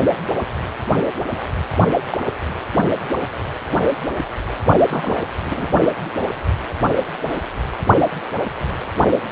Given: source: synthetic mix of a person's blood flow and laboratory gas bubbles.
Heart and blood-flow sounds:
Doppler ultrasound of blood flow; precordium
0.00-0.05 s: bubbles
2.11-2.18 s: bubbles
4.88-5.28 s: bubbles
5.45-5.67 s: bubbles
From the record:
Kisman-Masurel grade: 122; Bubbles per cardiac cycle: 1 to 2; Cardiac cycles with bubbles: 10 to 50%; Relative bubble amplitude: moderate (0.250 to 0.450); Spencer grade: 2 (many but less than half of the cardiac periods contain bubble signals, singularly or in groups); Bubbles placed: only in the low amplitude regions of the cardiac cycle

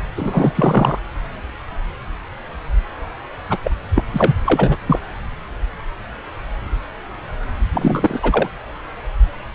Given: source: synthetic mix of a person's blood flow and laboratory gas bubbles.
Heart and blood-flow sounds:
Doppler ultrasound of blood flow; subclavian vein
0.16-0.99 s: bubbles
3.49-3.58 s: bubbles
3.63-3.71 s: bubbles
3.95-4.04 s: bubbles
4.12-4.32 s: bubbles
4.45-4.78 s: bubbles
4.86-5.00 s: bubbles
7.73-8.20 s: bubbles
8.22-8.49 s: bubbles
From the record:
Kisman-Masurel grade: 223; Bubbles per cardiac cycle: several, 3 to 8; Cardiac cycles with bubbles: 10 to 50%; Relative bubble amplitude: loud (0.450 to 0.775); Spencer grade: 2 (many but less than half of the cardiac periods contain bubble signals, singularly or in groups); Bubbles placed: anywhere in the cardiac cycle

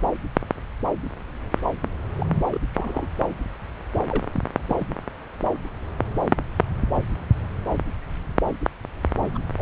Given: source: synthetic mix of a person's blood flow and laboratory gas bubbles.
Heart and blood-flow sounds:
Doppler ultrasound of blood flow; subclavian vein
2.18-2.26 s: bubbles
2.31-2.46 s: bubbles
2.50-2.60 s: bubbles
2.73-3.07 s: bubbles
4.09-4.25 s: bubbles
4.32-4.41 s: bubbles
4.69-4.86 s: bubbles
9.21-9.26 s: bubbles
9.34-9.38 s: bubbles
9.58-9.62 s: bubbles
From the record:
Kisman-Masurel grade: 221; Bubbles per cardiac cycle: several, 3 to 8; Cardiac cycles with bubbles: 10 to 50%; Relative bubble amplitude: barely perceptible (0.100 to 0.250); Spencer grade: 2 (many but less than half of the cardiac periods contain bubble signals, singularly or in groups); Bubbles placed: anywhere in the cardiac cycle

